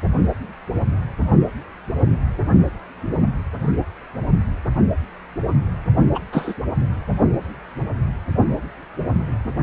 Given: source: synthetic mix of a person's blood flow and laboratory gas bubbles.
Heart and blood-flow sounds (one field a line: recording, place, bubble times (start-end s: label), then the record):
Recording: Doppler ultrasound of blood flow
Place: precordium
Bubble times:
6.14-6.20 s: bubbles
6.32-6.54 s: bubbles
From the record:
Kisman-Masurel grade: 113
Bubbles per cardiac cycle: 1 to 2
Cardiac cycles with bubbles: 1 to 10%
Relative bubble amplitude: loud (0.450 to 0.775)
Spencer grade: 1 (occasional bubble signal discernible with the cardiac motion signal, with majority of cardiac periods free of bubbles)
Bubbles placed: only in the low amplitude regions of the cardiac cycle